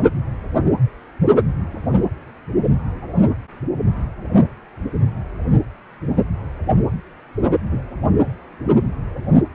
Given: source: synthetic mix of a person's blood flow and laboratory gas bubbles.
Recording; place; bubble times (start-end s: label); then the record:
Doppler ultrasound of blood flow; precordium
7.71-7.81 s: bubbles
From the record:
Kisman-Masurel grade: 112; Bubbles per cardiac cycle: 1 to 2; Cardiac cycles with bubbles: 1 to 10%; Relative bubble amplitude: moderate (0.250 to 0.450); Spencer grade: 1 (occasional bubble signal discernible with the cardiac motion signal, with majority of cardiac periods free of bubbles); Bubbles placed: only in the low amplitude regions of the cardiac cycle